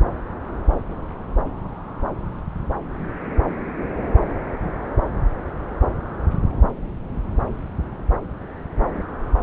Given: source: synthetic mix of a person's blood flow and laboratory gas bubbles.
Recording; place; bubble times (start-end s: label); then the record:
Doppler ultrasound of blood flow; subclavian vein
0.00-0.03 s: bubbles
From the record:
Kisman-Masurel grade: 211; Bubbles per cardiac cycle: several, 3 to 8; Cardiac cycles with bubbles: 1 to 10%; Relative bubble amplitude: barely perceptible (0.100 to 0.250); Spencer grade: 1 (occasional bubble signal discernible with the cardiac motion signal, with majority of cardiac periods free of bubbles); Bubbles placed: anywhere in the cardiac cycle